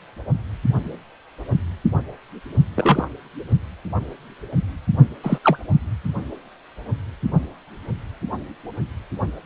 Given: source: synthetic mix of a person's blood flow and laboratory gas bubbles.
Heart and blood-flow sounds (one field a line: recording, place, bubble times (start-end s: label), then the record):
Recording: Doppler ultrasound of blood flow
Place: precordium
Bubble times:
2.75-3.08 s: bubbles
5.23-5.38 s: bubbles
5.44-5.58 s: bubbles
From the record:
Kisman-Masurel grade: 123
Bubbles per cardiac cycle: 1 to 2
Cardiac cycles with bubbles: 10 to 50%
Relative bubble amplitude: loud (0.450 to 0.775)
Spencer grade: 2 (many but less than half of the cardiac periods contain bubble signals, singularly or in groups)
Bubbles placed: only in the low amplitude regions of the cardiac cycle